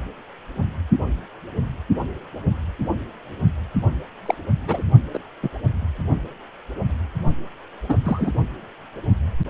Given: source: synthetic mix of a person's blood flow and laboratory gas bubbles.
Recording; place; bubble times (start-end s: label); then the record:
Doppler ultrasound of blood flow; precordium
4.25-4.34 s: bubbles
4.68-4.82 s: bubbles
5.13-5.18 s: bubbles
5.42-5.49 s: bubbles
7.89-7.95 s: bubbles
8.04-8.32 s: bubbles
From the record:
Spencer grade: 2 (many but less than half of the cardiac periods contain bubble signals, singularly or in groups); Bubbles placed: only in the low amplitude regions of the cardiac cycle